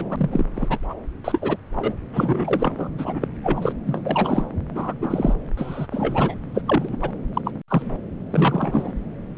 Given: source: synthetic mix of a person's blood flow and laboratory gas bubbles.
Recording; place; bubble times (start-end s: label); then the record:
Doppler ultrasound of blood flow; subclavian vein
0.00-0.45 s: bubbles
0.54-0.77 s: bubbles
0.90-0.94 s: bubbles
1.24-1.57 s: bubbles
1.75-1.92 s: bubbles
2.13-2.89 s: bubbles
2.98-3.28 s: bubbles
3.44-3.73 s: bubbles
3.85-4.47 s: bubbles
4.74-4.93 s: bubbles
5.01-5.34 s: bubbles
5.57-5.87 s: bubbles
5.91-6.35 s: bubbles
6.54-6.62 s: bubbles
6.68-6.97 s: bubbles
7.02-7.11 s: bubbles
7.34-7.41 s: bubbles
7.45-7.51 s: bubbles
7.68-7.82 s: bubbles
8.30-8.92 s: bubbles
From the record:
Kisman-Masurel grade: 242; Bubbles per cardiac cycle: several, 3 to 8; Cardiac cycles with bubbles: 100%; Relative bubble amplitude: moderate (0.250 to 0.450); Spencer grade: 3 (all of the cardiac periods contain showers or single bubble signals, but not dominating or overriding the cardiac motion signals); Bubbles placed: anywhere in the cardiac cycle